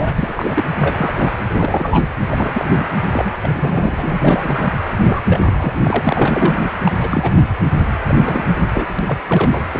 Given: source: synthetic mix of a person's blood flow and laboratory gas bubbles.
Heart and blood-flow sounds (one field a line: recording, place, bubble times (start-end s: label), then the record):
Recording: Doppler ultrasound of blood flow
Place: precordium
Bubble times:
0.00-0.14 s: bubbles
0.18-0.64 s: bubbles
0.78-1.38 s: bubbles
1.48-2.08 s: bubbles
2.28-2.88 s: bubbles
3.12-3.35 s: bubbles
3.43-4.72 s: bubbles
5.05-5.22 s: bubbles
5.27-6.59 s: bubbles
6.84-6.92 s: bubbles
7.00-7.40 s: bubbles
8.08-8.45 s: bubbles
8.59-8.68 s: bubbles
8.75-9.04 s: bubbles
9.07-9.18 s: bubbles
9.29-9.64 s: bubbles
9.72-9.80 s: bubbles
From the record:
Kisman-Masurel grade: 332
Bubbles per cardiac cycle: rolling drumbeat, 9 or more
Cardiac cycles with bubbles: 50 to 99%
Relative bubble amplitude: moderate (0.250 to 0.450)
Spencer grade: 3 (all of the cardiac periods contain showers or single bubble signals, but not dominating or overriding the cardiac motion signals)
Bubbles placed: anywhere in the cardiac cycle